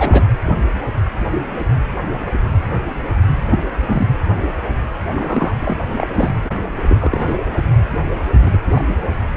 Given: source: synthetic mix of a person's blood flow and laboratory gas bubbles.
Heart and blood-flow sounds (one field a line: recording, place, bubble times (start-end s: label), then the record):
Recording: Doppler ultrasound of blood flow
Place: precordium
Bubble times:
0.00-0.28 s: bubbles
3.34-3.63 s: bubbles
3.86-4.08 s: bubbles
5.12-5.54 s: bubbles
5.61-5.75 s: bubbles
5.97-6.49 s: bubbles
6.88-7.37 s: bubbles
8.42-8.58 s: bubbles
8.67-8.84 s: bubbles
8.88-8.95 s: bubbles
From the record:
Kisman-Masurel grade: 232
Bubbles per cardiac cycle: several, 3 to 8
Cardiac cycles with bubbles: 50 to 99%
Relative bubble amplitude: moderate (0.250 to 0.450)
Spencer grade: 3 (all of the cardiac periods contain showers or single bubble signals, but not dominating or overriding the cardiac motion signals)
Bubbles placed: anywhere in the cardiac cycle